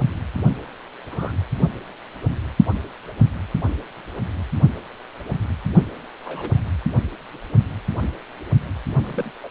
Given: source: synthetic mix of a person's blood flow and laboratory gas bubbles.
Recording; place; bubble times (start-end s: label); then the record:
Doppler ultrasound of blood flow; precordium
1.10-1.32 s: bubbles
6.25-6.64 s: bubbles
9.03-9.31 s: bubbles
9.43-9.49 s: bubbles
From the record:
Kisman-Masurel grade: 121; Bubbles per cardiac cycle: 1 to 2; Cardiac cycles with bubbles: 10 to 50%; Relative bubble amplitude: barely perceptible (0.100 to 0.250); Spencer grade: 2 (many but less than half of the cardiac periods contain bubble signals, singularly or in groups); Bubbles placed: only in the low amplitude regions of the cardiac cycle